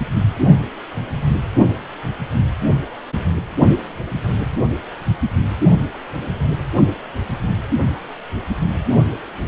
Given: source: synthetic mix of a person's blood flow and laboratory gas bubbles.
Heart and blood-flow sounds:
Doppler ultrasound of blood flow; precordium
no bubbles
From the record:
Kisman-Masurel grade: 000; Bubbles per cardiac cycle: 0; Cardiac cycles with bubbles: 0%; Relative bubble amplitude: no bubbles discernible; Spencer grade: 0 (complete lack of bubble signals)

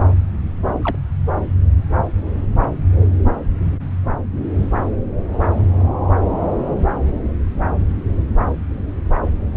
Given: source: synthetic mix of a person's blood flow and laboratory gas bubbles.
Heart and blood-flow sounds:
Doppler ultrasound of blood flow; subclavian vein
0.83-0.97 s: bubbles
From the record:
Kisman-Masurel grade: 112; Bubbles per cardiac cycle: 1 to 2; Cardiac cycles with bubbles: 1 to 10%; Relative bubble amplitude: moderate (0.250 to 0.450); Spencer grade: 1 (occasional bubble signal discernible with the cardiac motion signal, with majority of cardiac periods free of bubbles); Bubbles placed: anywhere in the cardiac cycle

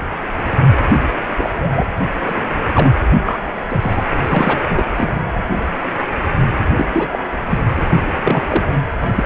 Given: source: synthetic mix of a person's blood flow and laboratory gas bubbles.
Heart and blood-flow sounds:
Doppler ultrasound of blood flow; precordium
1.38-1.50 s: bubbles
1.53-1.85 s: bubbles
2.24-2.49 s: bubbles
2.75-2.92 s: bubbles
3.24-3.40 s: bubbles
3.70-4.04 s: bubbles
4.26-4.61 s: bubbles
4.68-5.15 s: bubbles
6.76-6.86 s: bubbles
6.93-7.07 s: bubbles
7.12-7.19 s: bubbles
7.50-7.58 s: bubbles
7.76-7.84 s: bubbles
7.88-8.03 s: bubbles
8.23-8.64 s: bubbles
8.99-9.08 s: bubbles
9.15-9.26 s: bubbles
From the record:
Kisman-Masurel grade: 232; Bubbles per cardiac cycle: several, 3 to 8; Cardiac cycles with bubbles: 50 to 99%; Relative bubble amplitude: moderate (0.250 to 0.450); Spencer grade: 3 (all of the cardiac periods contain showers or single bubble signals, but not dominating or overriding the cardiac motion signals); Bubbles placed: anywhere in the cardiac cycle

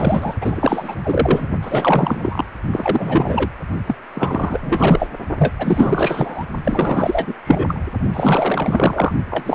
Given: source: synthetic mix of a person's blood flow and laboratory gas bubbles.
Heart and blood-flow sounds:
Doppler ultrasound of blood flow; precordium
0.00-0.35 s: bubbles
0.41-0.95 s: bubbles
1.04-1.49 s: bubbles
1.61-2.44 s: bubbles
2.72-3.50 s: bubbles
3.86-3.95 s: bubbles
4.13-5.07 s: bubbles
5.38-5.54 s: bubbles
5.58-6.45 s: bubbles
6.64-7.34 s: bubbles
7.42-7.82 s: bubbles
8.13-9.12 s: bubbles
9.29-9.55 s: bubbles
From the record:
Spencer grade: 4 (maximum detectable bubble signal sounding continuously throughout systole and diastole of every cardiac period, and overriding the amplitude of the normal cardiac signals); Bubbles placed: only in the low amplitude regions of the cardiac cycle

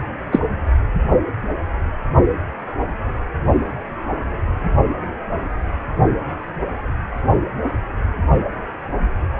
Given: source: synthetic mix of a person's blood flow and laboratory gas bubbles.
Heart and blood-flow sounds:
Doppler ultrasound of blood flow; precordium
0.32-0.40 s: bubbles
From the record:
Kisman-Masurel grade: 213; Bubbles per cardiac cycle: several, 3 to 8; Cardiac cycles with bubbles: 1 to 10%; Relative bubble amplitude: loud (0.450 to 0.775); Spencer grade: 1 (occasional bubble signal discernible with the cardiac motion signal, with majority of cardiac periods free of bubbles); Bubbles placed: only in the low amplitude regions of the cardiac cycle

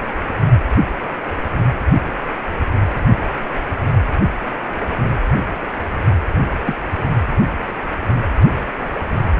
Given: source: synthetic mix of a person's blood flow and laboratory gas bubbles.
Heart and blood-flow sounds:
Doppler ultrasound of blood flow; precordium
6.66-6.77 s: bubbles
From the record:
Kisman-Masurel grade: 112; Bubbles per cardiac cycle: 1 to 2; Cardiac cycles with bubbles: 1 to 10%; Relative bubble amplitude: moderate (0.250 to 0.450); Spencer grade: 1 (occasional bubble signal discernible with the cardiac motion signal, with majority of cardiac periods free of bubbles); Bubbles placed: anywhere in the cardiac cycle

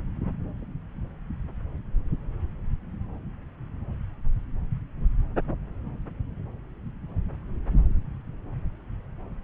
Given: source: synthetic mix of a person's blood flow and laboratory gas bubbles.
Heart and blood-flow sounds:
Doppler ultrasound of blood flow; subclavian vein
no bubbles
From the record:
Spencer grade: 0 (complete lack of bubble signals)

